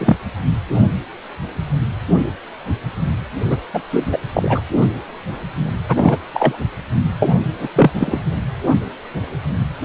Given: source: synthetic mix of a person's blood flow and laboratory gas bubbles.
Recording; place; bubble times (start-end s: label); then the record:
Doppler ultrasound of blood flow; precordium
0.00-0.16 s: bubbles
3.45-3.56 s: bubbles
3.73-3.81 s: bubbles
3.91-4.04 s: bubbles
4.10-4.18 s: bubbles
4.34-4.61 s: bubbles
5.88-6.18 s: bubbles
6.33-6.57 s: bubbles
7.20-7.29 s: bubbles
7.60-7.69 s: bubbles
7.75-7.92 s: bubbles
8.00-8.21 s: bubbles
From the record:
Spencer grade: 3 (all of the cardiac periods contain showers or single bubble signals, but not dominating or overriding the cardiac motion signals); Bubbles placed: anywhere in the cardiac cycle